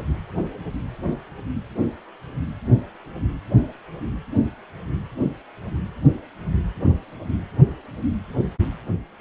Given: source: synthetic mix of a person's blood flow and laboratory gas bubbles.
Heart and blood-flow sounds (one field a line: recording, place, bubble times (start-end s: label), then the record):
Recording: Doppler ultrasound of blood flow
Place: precordium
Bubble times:
no bubbles
From the record:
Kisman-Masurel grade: 000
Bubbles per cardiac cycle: 0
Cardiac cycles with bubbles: 0%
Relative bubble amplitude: no bubbles discernible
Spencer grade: 0 (complete lack of bubble signals)